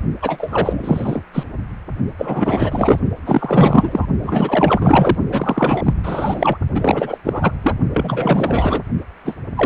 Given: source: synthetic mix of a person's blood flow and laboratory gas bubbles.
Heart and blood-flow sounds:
Doppler ultrasound of blood flow; precordium
0.21-1.22 s: bubbles
1.33-1.45 s: bubbles
2.18-2.99 s: bubbles
3.26-4.06 s: bubbles
4.21-5.17 s: bubbles
5.30-5.93 s: bubbles
6.03-6.58 s: bubbles
6.75-7.17 s: bubbles
7.25-7.52 s: bubbles
7.62-7.75 s: bubbles
7.93-8.83 s: bubbles
9.25-9.36 s: bubbles
9.56-9.66 s: bubbles
From the record:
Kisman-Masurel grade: 444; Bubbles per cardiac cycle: continuous sound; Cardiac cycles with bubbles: 100%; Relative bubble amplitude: maximal (0.775 to 0.999); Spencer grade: 4 (maximum detectable bubble signal sounding continuously throughout systole and diastole of every cardiac period, and overriding the amplitude of the normal cardiac signals); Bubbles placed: only in the low amplitude regions of the cardiac cycle

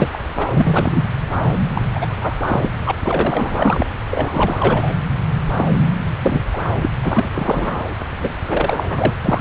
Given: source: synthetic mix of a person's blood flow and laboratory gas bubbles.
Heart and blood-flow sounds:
Doppler ultrasound of blood flow; subclavian vein
0.00-0.08 s: bubbles
0.13-0.18 s: bubbles
0.38-0.47 s: bubbles
0.50-1.09 s: bubbles
1.75-1.82 s: bubbles
1.95-2.38 s: bubbles
2.46-2.69 s: bubbles
2.85-2.92 s: bubbles
3.04-3.89 s: bubbles
4.11-4.58 s: bubbles
4.60-4.96 s: bubbles
5.57-5.67 s: bubbles
6.22-6.45 s: bubbles
6.53-6.59 s: bubbles
6.82-6.90 s: bubbles
7.03-7.84 s: bubbles
8.17-8.32 s: bubbles
8.47-9.15 s: bubbles
9.25-9.41 s: bubbles
From the record:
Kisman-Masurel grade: 333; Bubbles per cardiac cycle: rolling drumbeat, 9 or more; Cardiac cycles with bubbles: 50 to 99%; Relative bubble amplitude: loud (0.450 to 0.775); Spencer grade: 3 (all of the cardiac periods contain showers or single bubble signals, but not dominating or overriding the cardiac motion signals); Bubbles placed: anywhere in the cardiac cycle

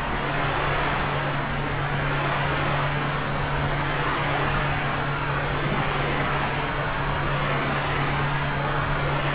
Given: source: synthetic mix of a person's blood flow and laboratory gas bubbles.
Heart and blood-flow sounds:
Doppler ultrasound of blood flow; subclavian vein
5.62-5.83 s: bubbles
From the record:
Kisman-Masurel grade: 111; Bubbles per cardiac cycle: 1 to 2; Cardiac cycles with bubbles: 1 to 10%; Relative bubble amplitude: barely perceptible (0.100 to 0.250); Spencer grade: 1 (occasional bubble signal discernible with the cardiac motion signal, with majority of cardiac periods free of bubbles); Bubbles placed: anywhere in the cardiac cycle

